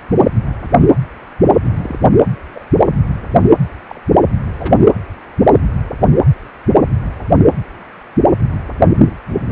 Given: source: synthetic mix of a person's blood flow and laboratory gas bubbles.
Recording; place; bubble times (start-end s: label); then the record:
Doppler ultrasound of blood flow; precordium
1.61-1.99 s: bubbles
2.55-2.65 s: bubbles
3.88-4.01 s: bubbles
4.58-4.76 s: bubbles
From the record:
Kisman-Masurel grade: 121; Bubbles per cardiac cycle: 1 to 2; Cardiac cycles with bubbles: 10 to 50%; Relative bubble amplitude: barely perceptible (0.100 to 0.250); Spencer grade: 2 (many but less than half of the cardiac periods contain bubble signals, singularly or in groups); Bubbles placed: anywhere in the cardiac cycle